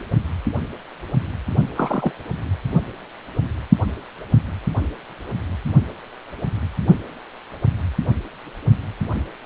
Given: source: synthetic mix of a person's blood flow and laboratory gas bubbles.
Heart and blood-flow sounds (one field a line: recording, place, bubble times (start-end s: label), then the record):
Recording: Doppler ultrasound of blood flow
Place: precordium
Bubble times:
1.76-2.11 s: bubbles
From the record:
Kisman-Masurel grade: 222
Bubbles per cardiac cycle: several, 3 to 8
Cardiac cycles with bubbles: 10 to 50%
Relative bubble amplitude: moderate (0.250 to 0.450)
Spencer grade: 2 (many but less than half of the cardiac periods contain bubble signals, singularly or in groups)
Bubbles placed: only in the low amplitude regions of the cardiac cycle